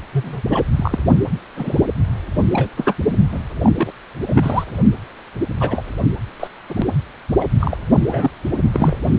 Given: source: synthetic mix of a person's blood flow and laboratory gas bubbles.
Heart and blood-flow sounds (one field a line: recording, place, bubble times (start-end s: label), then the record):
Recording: Doppler ultrasound of blood flow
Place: precordium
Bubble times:
0.12-0.43 s: bubbles
0.50-0.65 s: bubbles
0.77-0.99 s: bubbles
1.56-1.83 s: bubbles
2.52-2.68 s: bubbles
2.77-2.96 s: bubbles
3.31-3.40 s: bubbles
3.63-3.72 s: bubbles
3.77-3.92 s: bubbles
4.26-4.64 s: bubbles
5.60-5.84 s: bubbles
6.39-6.47 s: bubbles
6.69-6.85 s: bubbles
7.40-7.45 s: bubbles
7.61-7.78 s: bubbles
8.08-8.30 s: bubbles
8.72-8.96 s: bubbles
9.04-9.09 s: bubbles
From the record:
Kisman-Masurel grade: 242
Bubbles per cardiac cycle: several, 3 to 8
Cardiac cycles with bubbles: 100%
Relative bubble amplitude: moderate (0.250 to 0.450)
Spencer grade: 3 (all of the cardiac periods contain showers or single bubble signals, but not dominating or overriding the cardiac motion signals)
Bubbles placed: only in the low amplitude regions of the cardiac cycle